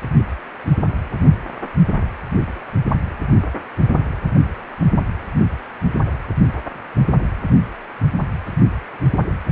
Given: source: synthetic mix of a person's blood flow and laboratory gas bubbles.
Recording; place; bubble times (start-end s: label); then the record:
Doppler ultrasound of blood flow; precordium
no bubbles
From the record:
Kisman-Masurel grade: 000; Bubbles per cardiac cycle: 0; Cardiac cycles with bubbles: 0%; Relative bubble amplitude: no bubbles discernible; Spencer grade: 0 (complete lack of bubble signals)